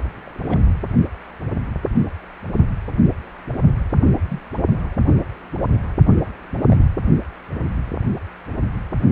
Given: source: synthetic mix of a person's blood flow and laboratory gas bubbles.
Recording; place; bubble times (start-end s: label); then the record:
Doppler ultrasound of blood flow; precordium
0.25-0.64 s: bubbles
4.28-4.39 s: bubbles
6.65-6.86 s: bubbles
From the record:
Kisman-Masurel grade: 121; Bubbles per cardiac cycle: 1 to 2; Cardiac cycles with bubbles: 10 to 50%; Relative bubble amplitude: barely perceptible (0.100 to 0.250); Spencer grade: 2 (many but less than half of the cardiac periods contain bubble signals, singularly or in groups); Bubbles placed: only in the low amplitude regions of the cardiac cycle